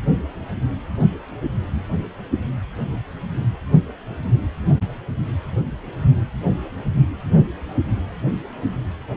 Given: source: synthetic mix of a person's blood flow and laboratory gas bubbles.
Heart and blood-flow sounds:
Doppler ultrasound of blood flow; precordium
no bubbles
From the record:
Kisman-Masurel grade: 000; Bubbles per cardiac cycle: 0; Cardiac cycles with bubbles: 0%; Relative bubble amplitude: no bubbles discernible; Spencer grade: 0 (complete lack of bubble signals)

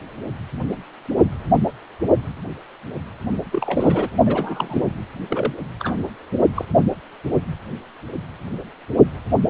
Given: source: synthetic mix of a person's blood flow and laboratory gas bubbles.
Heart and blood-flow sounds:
Doppler ultrasound of blood flow; precordium
3.52-4.09 s: bubbles
4.25-4.83 s: bubbles
5.29-5.54 s: bubbles
5.79-5.94 s: bubbles
6.54-6.65 s: bubbles
From the record:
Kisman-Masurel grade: 222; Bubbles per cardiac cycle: several, 3 to 8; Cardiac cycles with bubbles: 10 to 50%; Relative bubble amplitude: moderate (0.250 to 0.450); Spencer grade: 2 (many but less than half of the cardiac periods contain bubble signals, singularly or in groups); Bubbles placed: only in the low amplitude regions of the cardiac cycle

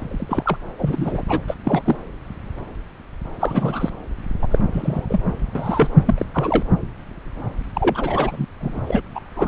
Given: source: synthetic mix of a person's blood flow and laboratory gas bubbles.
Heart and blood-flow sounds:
Doppler ultrasound of blood flow; subclavian vein
0.00-0.57 s: bubbles
0.78-1.23 s: bubbles
1.29-1.40 s: bubbles
1.48-1.54 s: bubbles
1.64-1.83 s: bubbles
1.85-1.96 s: bubbles
3.40-3.90 s: bubbles
4.42-4.47 s: bubbles
4.50-4.58 s: bubbles
4.73-5.06 s: bubbles
5.09-5.22 s: bubbles
5.55-5.88 s: bubbles
6.06-6.15 s: bubbles
6.18-6.25 s: bubbles
6.33-6.63 s: bubbles
7.75-8.46 s: bubbles
8.60-8.79 s: bubbles
8.87-9.01 s: bubbles
9.14-9.20 s: bubbles
9.35-9.48 s: bubbles
From the record:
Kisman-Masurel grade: 232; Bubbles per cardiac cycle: several, 3 to 8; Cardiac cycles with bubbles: 50 to 99%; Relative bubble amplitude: moderate (0.250 to 0.450); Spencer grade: 3 (all of the cardiac periods contain showers or single bubble signals, but not dominating or overriding the cardiac motion signals); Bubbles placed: anywhere in the cardiac cycle

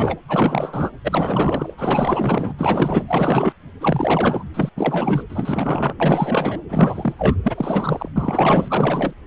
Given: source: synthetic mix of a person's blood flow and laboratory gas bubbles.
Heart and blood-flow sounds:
Doppler ultrasound of blood flow; precordium
0.00-0.17 s: bubbles
0.28-0.90 s: bubbles
1.04-1.75 s: bubbles
1.77-2.53 s: bubbles
2.58-3.54 s: bubbles
3.81-4.44 s: bubbles
4.54-4.70 s: bubbles
4.76-5.23 s: bubbles
5.29-5.94 s: bubbles
6.00-6.61 s: bubbles
6.68-7.36 s: bubbles
7.44-8.09 s: bubbles
8.16-9.13 s: bubbles
From the record:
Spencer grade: 4 (maximum detectable bubble signal sounding continuously throughout systole and diastole of every cardiac period, and overriding the amplitude of the normal cardiac signals); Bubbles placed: anywhere in the cardiac cycle

